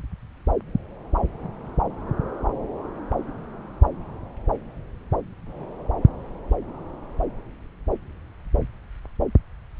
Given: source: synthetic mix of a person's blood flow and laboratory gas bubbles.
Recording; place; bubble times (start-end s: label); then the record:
Doppler ultrasound of blood flow; subclavian vein
no bubbles
From the record:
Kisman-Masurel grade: 000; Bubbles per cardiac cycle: 0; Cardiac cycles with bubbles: 0%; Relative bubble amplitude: no bubbles discernible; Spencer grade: 0 (complete lack of bubble signals)